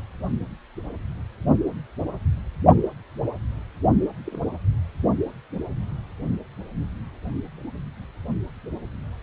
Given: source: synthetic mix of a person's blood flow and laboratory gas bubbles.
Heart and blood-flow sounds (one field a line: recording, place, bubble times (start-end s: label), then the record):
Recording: Doppler ultrasound of blood flow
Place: precordium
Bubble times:
4.24-4.40 s: bubbles
From the record:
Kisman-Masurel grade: 111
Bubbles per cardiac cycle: 1 to 2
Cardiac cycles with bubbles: 1 to 10%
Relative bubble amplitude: barely perceptible (0.100 to 0.250)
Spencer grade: 1 (occasional bubble signal discernible with the cardiac motion signal, with majority of cardiac periods free of bubbles)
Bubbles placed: only in the low amplitude regions of the cardiac cycle